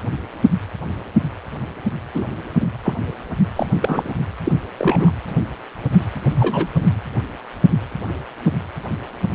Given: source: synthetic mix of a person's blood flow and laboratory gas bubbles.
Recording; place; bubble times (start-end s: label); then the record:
Doppler ultrasound of blood flow; precordium
2.14-2.25 s: bubbles
2.60-2.68 s: bubbles
2.83-2.94 s: bubbles
3.55-3.67 s: bubbles
3.80-4.13 s: bubbles
4.45-4.53 s: bubbles
4.78-5.12 s: bubbles
6.33-6.68 s: bubbles
6.77-6.87 s: bubbles
From the record:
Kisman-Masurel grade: 222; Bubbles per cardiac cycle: several, 3 to 8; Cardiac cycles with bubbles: 10 to 50%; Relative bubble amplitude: moderate (0.250 to 0.450); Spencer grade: 2 (many but less than half of the cardiac periods contain bubble signals, singularly or in groups); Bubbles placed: anywhere in the cardiac cycle